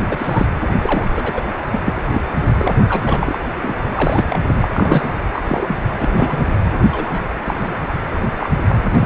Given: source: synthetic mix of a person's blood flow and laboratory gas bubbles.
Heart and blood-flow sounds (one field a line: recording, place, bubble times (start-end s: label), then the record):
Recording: Doppler ultrasound of blood flow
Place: precordium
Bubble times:
0.08-0.46 s: bubbles
0.81-1.07 s: bubbles
1.14-1.43 s: bubbles
1.72-1.79 s: bubbles
1.84-2.01 s: bubbles
2.12-2.21 s: bubbles
2.59-2.74 s: bubbles
2.88-3.38 s: bubbles
3.62-3.76 s: bubbles
3.90-4.65 s: bubbles
4.72-5.12 s: bubbles
5.33-5.42 s: bubbles
5.48-5.76 s: bubbles
5.98-6.50 s: bubbles
6.90-7.39 s: bubbles
7.45-7.74 s: bubbles
8.40-8.49 s: bubbles
8.69-8.75 s: bubbles
8.86-8.91 s: bubbles
8.95-9.06 s: bubbles
From the record:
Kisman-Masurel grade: 242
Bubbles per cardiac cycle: several, 3 to 8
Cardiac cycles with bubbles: 100%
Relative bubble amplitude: moderate (0.250 to 0.450)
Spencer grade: 3 (all of the cardiac periods contain showers or single bubble signals, but not dominating or overriding the cardiac motion signals)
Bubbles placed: anywhere in the cardiac cycle